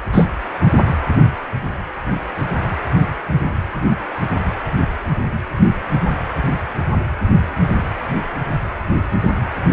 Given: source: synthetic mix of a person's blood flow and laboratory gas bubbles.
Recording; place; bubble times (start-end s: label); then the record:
Doppler ultrasound of blood flow; precordium
0.12-0.28 s: bubbles
From the record:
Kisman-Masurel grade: 113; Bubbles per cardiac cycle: 1 to 2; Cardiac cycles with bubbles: 1 to 10%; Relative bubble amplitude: loud (0.450 to 0.775); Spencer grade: 1 (occasional bubble signal discernible with the cardiac motion signal, with majority of cardiac periods free of bubbles); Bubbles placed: anywhere in the cardiac cycle